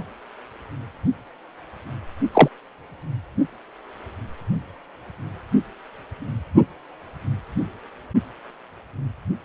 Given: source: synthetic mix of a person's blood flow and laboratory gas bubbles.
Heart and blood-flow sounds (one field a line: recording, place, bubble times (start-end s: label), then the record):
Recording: Doppler ultrasound of blood flow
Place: precordium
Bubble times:
2.33-2.49 s: bubbles
From the record:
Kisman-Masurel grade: 113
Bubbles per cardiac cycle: 1 to 2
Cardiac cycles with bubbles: 1 to 10%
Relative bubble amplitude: loud (0.450 to 0.775)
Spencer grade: 1 (occasional bubble signal discernible with the cardiac motion signal, with majority of cardiac periods free of bubbles)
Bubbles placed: only in the low amplitude regions of the cardiac cycle